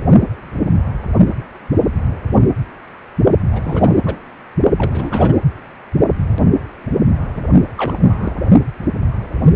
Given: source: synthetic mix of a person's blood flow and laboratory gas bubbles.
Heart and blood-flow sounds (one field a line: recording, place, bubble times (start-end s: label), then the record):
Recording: Doppler ultrasound of blood flow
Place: precordium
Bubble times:
3.51-4.19 s: bubbles
4.78-5.35 s: bubbles
7.35-7.42 s: bubbles
7.77-7.96 s: bubbles
8.04-8.34 s: bubbles
From the record:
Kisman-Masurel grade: 222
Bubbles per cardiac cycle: several, 3 to 8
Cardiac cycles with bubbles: 10 to 50%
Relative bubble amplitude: moderate (0.250 to 0.450)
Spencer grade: 2 (many but less than half of the cardiac periods contain bubble signals, singularly or in groups)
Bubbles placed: only in the low amplitude regions of the cardiac cycle